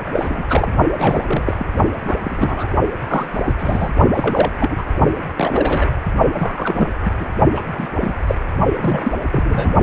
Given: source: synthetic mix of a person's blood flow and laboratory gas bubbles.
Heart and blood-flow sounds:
Doppler ultrasound of blood flow; precordium
0.12-0.45 s: bubbles
0.49-0.72 s: bubbles
0.98-1.66 s: bubbles
2.06-2.16 s: bubbles
2.23-2.68 s: bubbles
3.01-3.53 s: bubbles
3.58-3.90 s: bubbles
4.13-4.51 s: bubbles
4.58-4.84 s: bubbles
5.36-5.86 s: bubbles
6.35-6.88 s: bubbles
7.04-7.11 s: bubbles
7.18-7.29 s: bubbles
7.54-7.61 s: bubbles
7.77-7.88 s: bubbles
8.01-8.13 s: bubbles
8.27-8.35 s: bubbles
8.80-9.12 s: bubbles
9.31-9.74 s: bubbles
From the record:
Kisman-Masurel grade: 232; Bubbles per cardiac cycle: several, 3 to 8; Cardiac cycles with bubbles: 50 to 99%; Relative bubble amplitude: moderate (0.250 to 0.450); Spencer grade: 3 (all of the cardiac periods contain showers or single bubble signals, but not dominating or overriding the cardiac motion signals); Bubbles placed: only in the low amplitude regions of the cardiac cycle

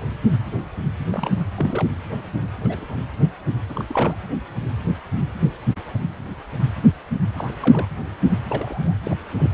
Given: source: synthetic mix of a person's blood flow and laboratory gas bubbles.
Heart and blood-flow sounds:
Doppler ultrasound of blood flow; precordium
1.13-1.44 s: bubbles
1.55-1.89 s: bubbles
2.60-3.00 s: bubbles
3.69-3.85 s: bubbles
3.88-4.16 s: bubbles
7.38-7.52 s: bubbles
7.60-7.88 s: bubbles
8.48-8.95 s: bubbles
9.04-9.14 s: bubbles
9.38-9.50 s: bubbles
From the record:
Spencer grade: 2 (many but less than half of the cardiac periods contain bubble signals, singularly or in groups); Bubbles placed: anywhere in the cardiac cycle

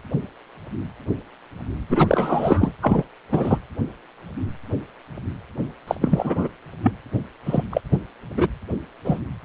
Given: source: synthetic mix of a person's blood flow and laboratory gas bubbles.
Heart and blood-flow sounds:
Doppler ultrasound of blood flow; precordium
1.90-2.72 s: bubbles
2.82-3.03 s: bubbles
3.31-3.58 s: bubbles
5.87-5.95 s: bubbles
6.01-6.47 s: bubbles
6.83-6.92 s: bubbles
7.46-7.62 s: bubbles
7.71-7.81 s: bubbles
7.92-7.98 s: bubbles
8.36-8.48 s: bubbles
9.04-9.20 s: bubbles
From the record:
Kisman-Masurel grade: 233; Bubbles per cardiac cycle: several, 3 to 8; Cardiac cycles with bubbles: 50 to 99%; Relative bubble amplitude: loud (0.450 to 0.775); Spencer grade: 3 (all of the cardiac periods contain showers or single bubble signals, but not dominating or overriding the cardiac motion signals); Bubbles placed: anywhere in the cardiac cycle

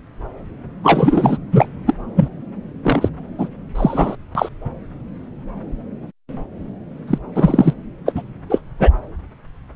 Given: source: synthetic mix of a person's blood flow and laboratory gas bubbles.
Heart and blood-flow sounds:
Doppler ultrasound of blood flow; subclavian vein
0.83-1.38 s: bubbles
1.52-1.69 s: bubbles
1.86-1.94 s: bubbles
2.16-2.29 s: bubbles
2.83-3.08 s: bubbles
3.38-3.48 s: bubbles
3.75-4.16 s: bubbles
4.35-4.49 s: bubbles
7.07-7.18 s: bubbles
7.35-7.74 s: bubbles
8.06-8.12 s: bubbles
8.15-8.22 s: bubbles
8.50-8.61 s: bubbles
8.79-8.91 s: bubbles
From the record:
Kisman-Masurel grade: 233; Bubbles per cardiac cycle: several, 3 to 8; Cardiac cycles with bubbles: 50 to 99%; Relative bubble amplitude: loud (0.450 to 0.775); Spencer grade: 3 (all of the cardiac periods contain showers or single bubble signals, but not dominating or overriding the cardiac motion signals); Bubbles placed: anywhere in the cardiac cycle

